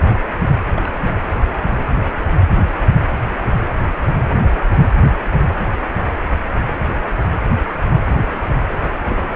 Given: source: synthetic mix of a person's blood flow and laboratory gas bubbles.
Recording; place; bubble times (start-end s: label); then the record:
Doppler ultrasound of blood flow; precordium
0.76-1.00 s: bubbles
9.10-9.15 s: bubbles
9.29-9.36 s: bubbles
From the record:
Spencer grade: 1 (occasional bubble signal discernible with the cardiac motion signal, with majority of cardiac periods free of bubbles); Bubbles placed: anywhere in the cardiac cycle